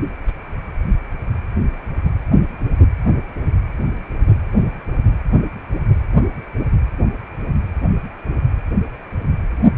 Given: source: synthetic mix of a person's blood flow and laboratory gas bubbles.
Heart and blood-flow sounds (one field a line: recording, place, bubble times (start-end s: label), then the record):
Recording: Doppler ultrasound of blood flow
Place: precordium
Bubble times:
no bubbles
From the record:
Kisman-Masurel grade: 000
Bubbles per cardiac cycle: 0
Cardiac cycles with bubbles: 0%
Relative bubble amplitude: no bubbles discernible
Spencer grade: 0 (complete lack of bubble signals)